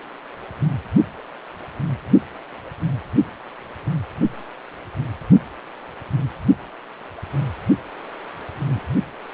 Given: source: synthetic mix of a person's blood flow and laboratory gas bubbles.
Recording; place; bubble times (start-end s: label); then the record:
Doppler ultrasound of blood flow; precordium
8.69-8.83 s: bubbles
From the record:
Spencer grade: 2 (many but less than half of the cardiac periods contain bubble signals, singularly or in groups); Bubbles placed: only in the low amplitude regions of the cardiac cycle